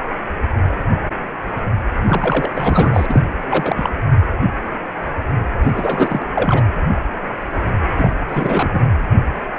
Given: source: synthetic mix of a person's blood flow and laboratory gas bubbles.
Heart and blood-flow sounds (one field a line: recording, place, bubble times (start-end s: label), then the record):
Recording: Doppler ultrasound of blood flow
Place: precordium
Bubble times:
2.04-3.21 s: bubbles
3.50-3.90 s: bubbles
5.64-6.28 s: bubbles
6.35-6.65 s: bubbles
7.97-8.10 s: bubbles
8.28-8.80 s: bubbles
From the record:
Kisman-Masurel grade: 332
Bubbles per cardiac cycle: rolling drumbeat, 9 or more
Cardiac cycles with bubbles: 50 to 99%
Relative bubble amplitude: moderate (0.250 to 0.450)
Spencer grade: 3 (all of the cardiac periods contain showers or single bubble signals, but not dominating or overriding the cardiac motion signals)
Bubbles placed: anywhere in the cardiac cycle